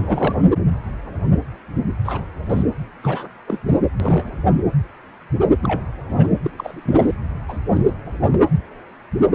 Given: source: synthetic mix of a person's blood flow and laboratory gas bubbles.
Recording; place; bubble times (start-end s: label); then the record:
Doppler ultrasound of blood flow; precordium
0.00-0.45 s: bubbles
2.04-2.24 s: bubbles
2.49-2.63 s: bubbles
3.04-3.28 s: bubbles
3.48-3.59 s: bubbles
3.65-3.78 s: bubbles
4.00-4.31 s: bubbles
5.62-5.80 s: bubbles
6.17-6.28 s: bubbles
6.42-6.50 s: bubbles
6.56-7.15 s: bubbles
7.48-7.58 s: bubbles
7.73-7.81 s: bubbles
7.85-7.92 s: bubbles
8.32-8.39 s: bubbles
From the record:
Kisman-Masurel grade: 232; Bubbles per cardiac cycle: several, 3 to 8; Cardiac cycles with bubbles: 50 to 99%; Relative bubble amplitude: moderate (0.250 to 0.450); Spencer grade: 3 (all of the cardiac periods contain showers or single bubble signals, but not dominating or overriding the cardiac motion signals); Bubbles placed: anywhere in the cardiac cycle